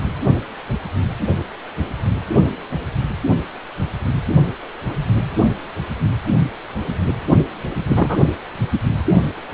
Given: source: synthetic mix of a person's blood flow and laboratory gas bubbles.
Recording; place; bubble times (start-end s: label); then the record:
Doppler ultrasound of blood flow; precordium
7.88-8.29 s: bubbles
From the record:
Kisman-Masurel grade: 213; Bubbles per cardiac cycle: several, 3 to 8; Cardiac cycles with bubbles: 1 to 10%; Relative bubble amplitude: loud (0.450 to 0.775); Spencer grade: 1 (occasional bubble signal discernible with the cardiac motion signal, with majority of cardiac periods free of bubbles); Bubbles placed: only in the low amplitude regions of the cardiac cycle